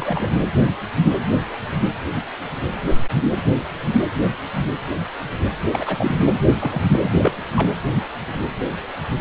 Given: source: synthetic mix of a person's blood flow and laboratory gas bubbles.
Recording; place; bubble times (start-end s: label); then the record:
Doppler ultrasound of blood flow; precordium
0.00-0.27 s: bubbles
5.72-6.33 s: bubbles
6.60-6.80 s: bubbles
6.92-7.12 s: bubbles
7.17-7.32 s: bubbles
7.55-7.68 s: bubbles
From the record:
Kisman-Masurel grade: 222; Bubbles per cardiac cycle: several, 3 to 8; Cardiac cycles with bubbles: 10 to 50%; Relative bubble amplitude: moderate (0.250 to 0.450); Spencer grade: 2 (many but less than half of the cardiac periods contain bubble signals, singularly or in groups); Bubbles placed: anywhere in the cardiac cycle